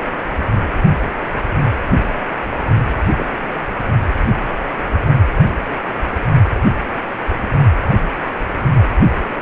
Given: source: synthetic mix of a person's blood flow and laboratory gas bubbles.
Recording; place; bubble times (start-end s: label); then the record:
Doppler ultrasound of blood flow; precordium
3.16-3.26 s: bubbles
From the record:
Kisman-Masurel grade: 111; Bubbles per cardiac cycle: 1 to 2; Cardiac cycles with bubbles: 1 to 10%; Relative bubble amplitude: barely perceptible (0.100 to 0.250); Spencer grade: 1 (occasional bubble signal discernible with the cardiac motion signal, with majority of cardiac periods free of bubbles); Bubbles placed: only in the low amplitude regions of the cardiac cycle